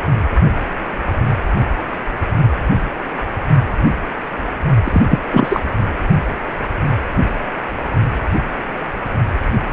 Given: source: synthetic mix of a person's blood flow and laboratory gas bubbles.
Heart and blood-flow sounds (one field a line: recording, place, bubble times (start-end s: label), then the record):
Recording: Doppler ultrasound of blood flow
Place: precordium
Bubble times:
4.83-5.01 s: bubbles
5.08-5.19 s: bubbles
5.33-5.60 s: bubbles
From the record:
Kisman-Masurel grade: 213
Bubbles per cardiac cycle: several, 3 to 8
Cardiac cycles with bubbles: 1 to 10%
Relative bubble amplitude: loud (0.450 to 0.775)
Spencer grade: 1 (occasional bubble signal discernible with the cardiac motion signal, with majority of cardiac periods free of bubbles)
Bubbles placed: only in the low amplitude regions of the cardiac cycle